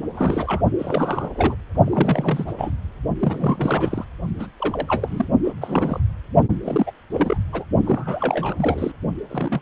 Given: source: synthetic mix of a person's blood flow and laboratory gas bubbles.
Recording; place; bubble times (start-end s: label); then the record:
Doppler ultrasound of blood flow; precordium
0.15-0.61 s: bubbles
0.78-1.55 s: bubbles
1.84-2.45 s: bubbles
2.47-2.53 s: bubbles
2.58-2.71 s: bubbles
3.19-4.05 s: bubbles
4.39-4.47 s: bubbles
4.58-5.28 s: bubbles
5.44-5.52 s: bubbles
5.61-6.00 s: bubbles
6.62-6.92 s: bubbles
7.10-7.37 s: bubbles
7.52-7.65 s: bubbles
7.85-8.92 s: bubbles
9.28-9.62 s: bubbles
From the record:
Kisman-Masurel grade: 342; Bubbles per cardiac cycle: rolling drumbeat, 9 or more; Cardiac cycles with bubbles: 100%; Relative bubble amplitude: moderate (0.250 to 0.450); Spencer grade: 3 (all of the cardiac periods contain showers or single bubble signals, but not dominating or overriding the cardiac motion signals); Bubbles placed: only in the low amplitude regions of the cardiac cycle